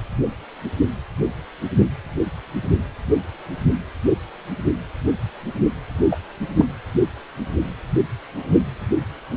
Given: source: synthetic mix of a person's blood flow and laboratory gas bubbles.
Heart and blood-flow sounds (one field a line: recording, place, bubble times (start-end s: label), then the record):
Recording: Doppler ultrasound of blood flow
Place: precordium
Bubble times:
6.11-6.16 s: bubbles
6.57-6.64 s: bubbles
From the record:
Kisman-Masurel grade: 113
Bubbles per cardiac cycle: 1 to 2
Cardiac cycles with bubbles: 1 to 10%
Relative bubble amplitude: loud (0.450 to 0.775)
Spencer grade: 1 (occasional bubble signal discernible with the cardiac motion signal, with majority of cardiac periods free of bubbles)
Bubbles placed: anywhere in the cardiac cycle